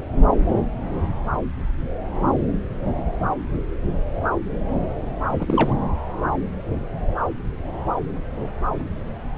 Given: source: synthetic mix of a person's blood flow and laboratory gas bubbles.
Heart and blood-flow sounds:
Doppler ultrasound of blood flow; subclavian vein
5.30-5.75 s: bubbles
From the record:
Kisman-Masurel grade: 212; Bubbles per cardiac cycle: several, 3 to 8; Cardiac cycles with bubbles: 1 to 10%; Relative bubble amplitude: moderate (0.250 to 0.450); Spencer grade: 1 (occasional bubble signal discernible with the cardiac motion signal, with majority of cardiac periods free of bubbles); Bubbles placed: anywhere in the cardiac cycle

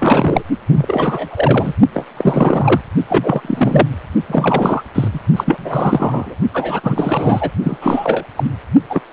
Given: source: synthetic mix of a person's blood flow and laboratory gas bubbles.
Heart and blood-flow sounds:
Doppler ultrasound of blood flow; precordium
0.00-0.43 s: bubbles
0.74-1.73 s: bubbles
1.94-2.05 s: bubbles
2.17-2.81 s: bubbles
3.09-3.88 s: bubbles
4.28-4.83 s: bubbles
4.94-5.08 s: bubbles
5.13-5.19 s: bubbles
5.36-6.35 s: bubbles
6.54-7.50 s: bubbles
7.62-7.77 s: bubbles
7.81-8.24 s: bubbles
8.36-8.50 s: bubbles
8.89-9.02 s: bubbles
9.10-9.13 s: bubbles
From the record:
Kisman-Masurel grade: 333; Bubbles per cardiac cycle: rolling drumbeat, 9 or more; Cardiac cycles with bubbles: 50 to 99%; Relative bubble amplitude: loud (0.450 to 0.775); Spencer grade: 3 (all of the cardiac periods contain showers or single bubble signals, but not dominating or overriding the cardiac motion signals); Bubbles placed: only in the low amplitude regions of the cardiac cycle

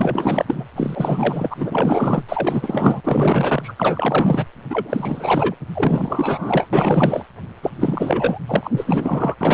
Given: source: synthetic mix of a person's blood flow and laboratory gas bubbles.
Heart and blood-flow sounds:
Doppler ultrasound of blood flow; precordium
0.00-0.64 s: bubbles
0.75-2.23 s: bubbles
2.29-3.01 s: bubbles
3.04-3.73 s: bubbles
3.76-4.46 s: bubbles
4.70-5.55 s: bubbles
5.75-6.67 s: bubbles
6.73-7.26 s: bubbles
7.62-7.71 s: bubbles
7.76-8.39 s: bubbles
8.47-9.35 s: bubbles
9.40-9.54 s: bubbles
From the record:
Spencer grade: 4 (maximum detectable bubble signal sounding continuously throughout systole and diastole of every cardiac period, and overriding the amplitude of the normal cardiac signals); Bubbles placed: anywhere in the cardiac cycle

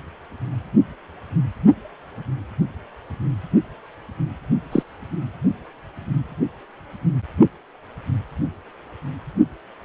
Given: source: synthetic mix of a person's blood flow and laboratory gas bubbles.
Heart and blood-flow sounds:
Doppler ultrasound of blood flow; precordium
4.72-4.83 s: bubbles
From the record:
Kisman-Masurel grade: 112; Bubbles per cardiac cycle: 1 to 2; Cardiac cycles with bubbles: 1 to 10%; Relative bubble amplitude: moderate (0.250 to 0.450); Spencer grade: 1 (occasional bubble signal discernible with the cardiac motion signal, with majority of cardiac periods free of bubbles); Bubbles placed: only in the low amplitude regions of the cardiac cycle

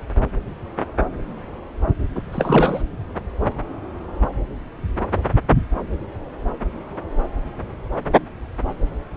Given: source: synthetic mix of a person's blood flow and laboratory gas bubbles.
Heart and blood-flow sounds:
Doppler ultrasound of blood flow; subclavian vein
2.15-2.21 s: bubbles
2.32-2.82 s: bubbles
From the record:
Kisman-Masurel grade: 213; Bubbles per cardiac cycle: several, 3 to 8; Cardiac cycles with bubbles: 1 to 10%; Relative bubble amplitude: loud (0.450 to 0.775); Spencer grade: 1 (occasional bubble signal discernible with the cardiac motion signal, with majority of cardiac periods free of bubbles); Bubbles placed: anywhere in the cardiac cycle

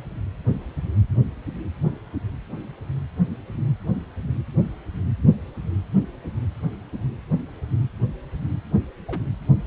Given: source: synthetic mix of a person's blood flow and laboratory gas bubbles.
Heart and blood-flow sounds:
Doppler ultrasound of blood flow; precordium
9.06-9.22 s: bubbles
From the record:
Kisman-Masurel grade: 111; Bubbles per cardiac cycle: 1 to 2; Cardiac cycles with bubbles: 1 to 10%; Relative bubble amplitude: barely perceptible (0.100 to 0.250); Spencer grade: 1 (occasional bubble signal discernible with the cardiac motion signal, with majority of cardiac periods free of bubbles); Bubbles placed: anywhere in the cardiac cycle

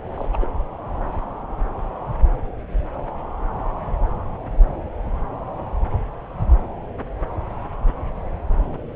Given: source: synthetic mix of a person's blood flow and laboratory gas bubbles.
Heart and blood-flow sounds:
Doppler ultrasound of blood flow; subclavian vein
0.14-0.29 s: bubbles
0.32-0.38 s: bubbles
0.41-0.47 s: bubbles
From the record:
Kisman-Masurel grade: 211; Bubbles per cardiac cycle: several, 3 to 8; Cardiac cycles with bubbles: 1 to 10%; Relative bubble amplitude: barely perceptible (0.100 to 0.250); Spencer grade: 1 (occasional bubble signal discernible with the cardiac motion signal, with majority of cardiac periods free of bubbles); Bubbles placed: anywhere in the cardiac cycle

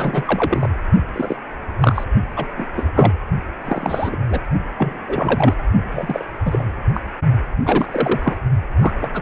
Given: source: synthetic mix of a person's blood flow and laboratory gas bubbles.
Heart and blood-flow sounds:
Doppler ultrasound of blood flow; precordium
0.00-0.70 s: bubbles
1.12-1.36 s: bubbles
1.80-2.04 s: bubbles
2.36-2.46 s: bubbles
2.57-2.68 s: bubbles
2.75-2.91 s: bubbles
2.95-3.12 s: bubbles
3.65-4.16 s: bubbles
4.29-4.39 s: bubbles
4.78-4.99 s: bubbles
5.07-5.54 s: bubbles
5.91-6.25 s: bubbles
6.45-6.65 s: bubbles
6.94-7.01 s: bubbles
7.63-8.37 s: bubbles
8.80-8.91 s: bubbles
9.00-9.22 s: bubbles
From the record:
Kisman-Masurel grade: 243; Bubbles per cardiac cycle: several, 3 to 8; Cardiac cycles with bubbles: 100%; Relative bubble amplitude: loud (0.450 to 0.775); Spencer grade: 3 (all of the cardiac periods contain showers or single bubble signals, but not dominating or overriding the cardiac motion signals); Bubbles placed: only in the low amplitude regions of the cardiac cycle

